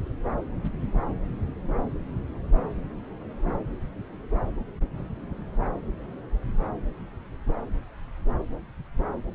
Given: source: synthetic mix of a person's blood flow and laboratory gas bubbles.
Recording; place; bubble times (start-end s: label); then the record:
Doppler ultrasound of blood flow; subclavian vein
no bubbles
From the record:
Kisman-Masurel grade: 000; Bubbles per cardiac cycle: 0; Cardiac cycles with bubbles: 0%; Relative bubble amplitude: no bubbles discernible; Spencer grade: 0 (complete lack of bubble signals)